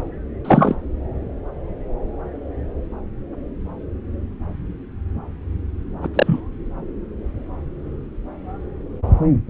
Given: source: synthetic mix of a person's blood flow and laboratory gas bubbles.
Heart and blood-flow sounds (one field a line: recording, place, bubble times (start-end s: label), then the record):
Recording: Doppler ultrasound of blood flow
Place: subclavian vein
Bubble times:
0.44-0.74 s: bubbles
6.02-6.08 s: bubbles
6.14-6.40 s: bubbles
From the record:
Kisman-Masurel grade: 213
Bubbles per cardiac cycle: several, 3 to 8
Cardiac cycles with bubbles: 1 to 10%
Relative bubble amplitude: loud (0.450 to 0.775)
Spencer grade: 1 (occasional bubble signal discernible with the cardiac motion signal, with majority of cardiac periods free of bubbles)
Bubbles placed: anywhere in the cardiac cycle